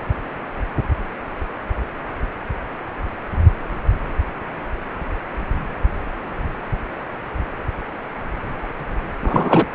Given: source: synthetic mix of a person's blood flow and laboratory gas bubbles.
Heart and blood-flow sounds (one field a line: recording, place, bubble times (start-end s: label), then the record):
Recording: Doppler ultrasound of blood flow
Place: precordium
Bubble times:
9.22-9.65 s: bubbles
From the record:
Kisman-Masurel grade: 213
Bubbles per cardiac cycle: several, 3 to 8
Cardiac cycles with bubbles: 1 to 10%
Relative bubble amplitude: loud (0.450 to 0.775)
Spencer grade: 1 (occasional bubble signal discernible with the cardiac motion signal, with majority of cardiac periods free of bubbles)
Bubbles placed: anywhere in the cardiac cycle